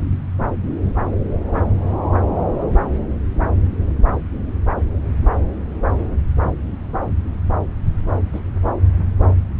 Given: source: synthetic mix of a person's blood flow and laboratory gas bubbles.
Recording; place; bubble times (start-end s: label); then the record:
Doppler ultrasound of blood flow; subclavian vein
1.54-1.62 s: bubbles
8.32-8.40 s: bubbles
From the record:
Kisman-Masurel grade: 121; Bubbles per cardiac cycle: 1 to 2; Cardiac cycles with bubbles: 10 to 50%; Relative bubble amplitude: barely perceptible (0.100 to 0.250); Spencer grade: 2 (many but less than half of the cardiac periods contain bubble signals, singularly or in groups); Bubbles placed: anywhere in the cardiac cycle